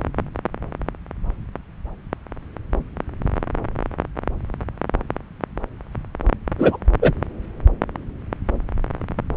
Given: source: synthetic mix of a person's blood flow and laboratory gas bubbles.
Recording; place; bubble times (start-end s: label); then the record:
Doppler ultrasound of blood flow; subclavian vein
6.58-6.78 s: bubbles
7.02-7.12 s: bubbles
From the record:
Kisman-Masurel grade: 213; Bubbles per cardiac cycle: several, 3 to 8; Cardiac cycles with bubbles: 1 to 10%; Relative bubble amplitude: loud (0.450 to 0.775); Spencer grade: 1 (occasional bubble signal discernible with the cardiac motion signal, with majority of cardiac periods free of bubbles); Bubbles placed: anywhere in the cardiac cycle